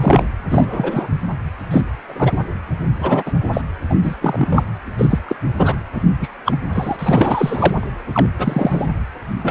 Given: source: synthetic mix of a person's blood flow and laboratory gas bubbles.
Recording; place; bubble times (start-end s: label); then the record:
Doppler ultrasound of blood flow; precordium
0.00-0.25 s: bubbles
0.49-1.08 s: bubbles
1.71-1.81 s: bubbles
2.07-2.38 s: bubbles
3.00-3.31 s: bubbles
3.53-3.61 s: bubbles
3.89-3.95 s: bubbles
4.03-4.15 s: bubbles
4.21-4.64 s: bubbles
4.98-5.19 s: bubbles
5.28-5.36 s: bubbles
5.57-5.75 s: bubbles
5.93-6.02 s: bubbles
6.21-6.29 s: bubbles
6.45-6.57 s: bubbles
6.73-7.88 s: bubbles
8.12-8.26 s: bubbles
8.38-8.88 s: bubbles
9.42-9.51 s: bubbles
From the record:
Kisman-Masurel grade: 243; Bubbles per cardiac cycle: several, 3 to 8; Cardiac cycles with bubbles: 100%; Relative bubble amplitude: loud (0.450 to 0.775); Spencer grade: 3 (all of the cardiac periods contain showers or single bubble signals, but not dominating or overriding the cardiac motion signals); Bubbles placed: anywhere in the cardiac cycle